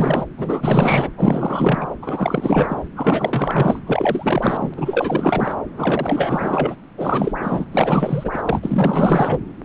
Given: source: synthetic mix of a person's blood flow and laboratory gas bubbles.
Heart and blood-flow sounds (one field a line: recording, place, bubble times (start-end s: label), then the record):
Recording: Doppler ultrasound of blood flow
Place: subclavian vein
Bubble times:
0.00-0.26 s: bubbles
0.37-1.10 s: bubbles
1.17-1.89 s: bubbles
2.01-2.83 s: bubbles
2.95-3.79 s: bubbles
3.86-4.74 s: bubbles
4.77-5.57 s: bubbles
5.77-6.76 s: bubbles
6.98-7.65 s: bubbles
7.71-9.40 s: bubbles
From the record:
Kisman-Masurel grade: 444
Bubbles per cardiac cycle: continuous sound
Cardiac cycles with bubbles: 100%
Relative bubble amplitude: maximal (0.775 to 0.999)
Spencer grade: 4 (maximum detectable bubble signal sounding continuously throughout systole and diastole of every cardiac period, and overriding the amplitude of the normal cardiac signals)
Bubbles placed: anywhere in the cardiac cycle